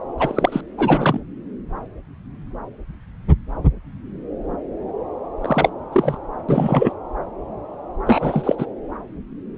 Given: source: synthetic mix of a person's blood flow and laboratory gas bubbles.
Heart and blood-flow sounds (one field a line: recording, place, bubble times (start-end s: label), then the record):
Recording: Doppler ultrasound of blood flow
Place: subclavian vein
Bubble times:
0.17-0.61 s: bubbles
0.78-1.20 s: bubbles
5.41-5.69 s: bubbles
5.92-6.19 s: bubbles
6.48-6.93 s: bubbles
8.05-8.66 s: bubbles
From the record:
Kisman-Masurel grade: 223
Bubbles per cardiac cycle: several, 3 to 8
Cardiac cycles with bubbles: 10 to 50%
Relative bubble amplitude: loud (0.450 to 0.775)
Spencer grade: 2 (many but less than half of the cardiac periods contain bubble signals, singularly or in groups)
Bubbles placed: anywhere in the cardiac cycle